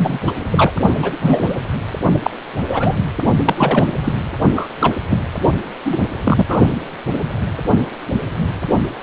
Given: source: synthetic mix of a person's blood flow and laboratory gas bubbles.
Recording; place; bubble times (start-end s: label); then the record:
Doppler ultrasound of blood flow; precordium
0.00-0.20 s: bubbles
0.27-0.34 s: bubbles
0.51-0.72 s: bubbles
1.02-1.56 s: bubbles
2.22-2.30 s: bubbles
2.58-2.96 s: bubbles
3.45-3.88 s: bubbles
4.04-4.12 s: bubbles
4.54-4.67 s: bubbles
4.81-4.95 s: bubbles
5.09-5.18 s: bubbles
5.84-5.97 s: bubbles
6.23-6.46 s: bubbles
6.48-6.59 s: bubbles
From the record:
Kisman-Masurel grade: 233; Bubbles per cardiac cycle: several, 3 to 8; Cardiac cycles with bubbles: 50 to 99%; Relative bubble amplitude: loud (0.450 to 0.775); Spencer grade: 3 (all of the cardiac periods contain showers or single bubble signals, but not dominating or overriding the cardiac motion signals); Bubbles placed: only in the low amplitude regions of the cardiac cycle